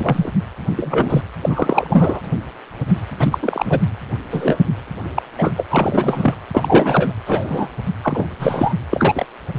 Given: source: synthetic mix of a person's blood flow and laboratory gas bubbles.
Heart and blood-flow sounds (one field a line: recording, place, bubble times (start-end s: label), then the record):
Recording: Doppler ultrasound of blood flow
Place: precordium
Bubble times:
0.00-0.31 s: bubbles
0.76-1.21 s: bubbles
1.41-2.21 s: bubbles
3.19-3.38 s: bubbles
3.42-3.80 s: bubbles
4.30-4.59 s: bubbles
5.16-5.22 s: bubbles
5.38-5.52 s: bubbles
5.57-5.65 s: bubbles
5.70-6.34 s: bubbles
6.51-7.14 s: bubbles
7.26-7.67 s: bubbles
8.02-8.26 s: bubbles
8.39-8.74 s: bubbles
8.90-9.26 s: bubbles
9.54-9.59 s: bubbles
From the record:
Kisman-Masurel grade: 233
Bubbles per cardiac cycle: several, 3 to 8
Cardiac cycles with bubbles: 50 to 99%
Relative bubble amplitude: loud (0.450 to 0.775)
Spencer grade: 3 (all of the cardiac periods contain showers or single bubble signals, but not dominating or overriding the cardiac motion signals)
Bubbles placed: anywhere in the cardiac cycle